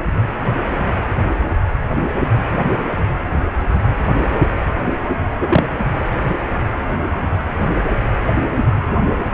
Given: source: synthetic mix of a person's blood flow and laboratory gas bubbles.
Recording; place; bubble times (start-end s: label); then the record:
Doppler ultrasound of blood flow; precordium
5.40-5.63 s: bubbles
From the record:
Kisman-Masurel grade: 123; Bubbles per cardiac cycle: 1 to 2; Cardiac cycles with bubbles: 10 to 50%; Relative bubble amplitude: loud (0.450 to 0.775); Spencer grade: 2 (many but less than half of the cardiac periods contain bubble signals, singularly or in groups); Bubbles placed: anywhere in the cardiac cycle